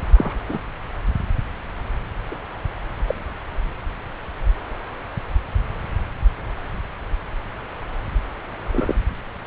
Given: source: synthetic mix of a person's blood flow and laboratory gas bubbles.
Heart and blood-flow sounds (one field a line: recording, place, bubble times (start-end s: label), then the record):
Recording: Doppler ultrasound of blood flow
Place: subclavian vein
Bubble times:
0.17-0.36 s: bubbles
0.49-0.58 s: bubbles
2.31-2.35 s: bubbles
3.08-3.15 s: bubbles
8.71-8.95 s: bubbles
From the record:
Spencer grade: 2 (many but less than half of the cardiac periods contain bubble signals, singularly or in groups)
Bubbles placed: anywhere in the cardiac cycle